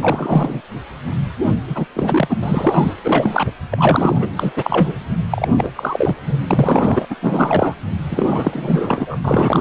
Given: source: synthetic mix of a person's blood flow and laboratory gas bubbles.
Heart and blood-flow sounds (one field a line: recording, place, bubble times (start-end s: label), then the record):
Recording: Doppler ultrasound of blood flow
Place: precordium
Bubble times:
0.02-0.60 s: bubbles
1.67-1.85 s: bubbles
1.94-2.36 s: bubbles
2.42-2.94 s: bubbles
3.03-3.50 s: bubbles
3.72-4.29 s: bubbles
4.35-4.52 s: bubbles
4.56-4.93 s: bubbles
5.30-5.48 s: bubbles
5.57-5.71 s: bubbles
5.75-6.16 s: bubbles
6.26-6.42 s: bubbles
6.50-7.05 s: bubbles
7.09-7.16 s: bubbles
7.21-7.75 s: bubbles
8.09-9.18 s: bubbles
9.24-9.61 s: bubbles
From the record:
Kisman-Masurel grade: 333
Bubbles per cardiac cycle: rolling drumbeat, 9 or more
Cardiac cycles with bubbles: 50 to 99%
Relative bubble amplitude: loud (0.450 to 0.775)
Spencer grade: 3 (all of the cardiac periods contain showers or single bubble signals, but not dominating or overriding the cardiac motion signals)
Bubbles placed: anywhere in the cardiac cycle